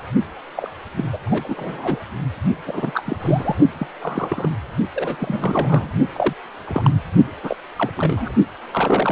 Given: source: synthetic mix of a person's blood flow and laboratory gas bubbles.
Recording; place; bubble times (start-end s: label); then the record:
Doppler ultrasound of blood flow; precordium
0.56-0.71 s: bubbles
0.97-1.05 s: bubbles
1.12-1.18 s: bubbles
1.26-2.00 s: bubbles
2.66-3.02 s: bubbles
3.06-3.17 s: bubbles
3.20-3.57 s: bubbles
3.78-3.87 s: bubbles
4.01-4.49 s: bubbles
4.95-5.16 s: bubbles
5.20-5.88 s: bubbles
6.12-6.33 s: bubbles
6.67-6.91 s: bubbles
7.43-7.57 s: bubbles
7.76-7.90 s: bubbles
7.97-8.33 s: bubbles
8.72-9.12 s: bubbles
From the record:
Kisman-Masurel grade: 242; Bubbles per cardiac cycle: several, 3 to 8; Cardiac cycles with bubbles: 100%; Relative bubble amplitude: moderate (0.250 to 0.450); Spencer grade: 3 (all of the cardiac periods contain showers or single bubble signals, but not dominating or overriding the cardiac motion signals); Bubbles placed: only in the low amplitude regions of the cardiac cycle